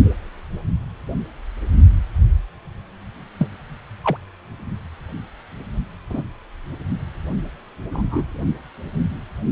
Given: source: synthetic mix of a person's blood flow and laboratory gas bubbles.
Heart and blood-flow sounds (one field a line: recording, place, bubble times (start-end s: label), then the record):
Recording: Doppler ultrasound of blood flow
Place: precordium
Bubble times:
3.38-3.48 s: bubbles
4.04-4.17 s: bubbles
6.09-6.22 s: bubbles
7.91-8.29 s: bubbles
From the record:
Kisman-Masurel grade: 122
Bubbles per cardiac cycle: 1 to 2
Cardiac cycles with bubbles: 10 to 50%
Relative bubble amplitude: moderate (0.250 to 0.450)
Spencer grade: 2 (many but less than half of the cardiac periods contain bubble signals, singularly or in groups)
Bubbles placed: only in the low amplitude regions of the cardiac cycle